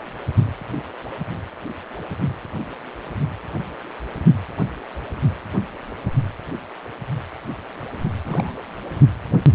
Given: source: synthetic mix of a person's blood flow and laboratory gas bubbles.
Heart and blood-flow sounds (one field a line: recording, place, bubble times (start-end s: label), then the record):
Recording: Doppler ultrasound of blood flow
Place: precordium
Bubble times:
8.23-8.53 s: bubbles
From the record:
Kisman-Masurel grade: 211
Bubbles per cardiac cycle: several, 3 to 8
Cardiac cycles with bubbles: 1 to 10%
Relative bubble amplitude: barely perceptible (0.100 to 0.250)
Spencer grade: 1 (occasional bubble signal discernible with the cardiac motion signal, with majority of cardiac periods free of bubbles)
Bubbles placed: only in the low amplitude regions of the cardiac cycle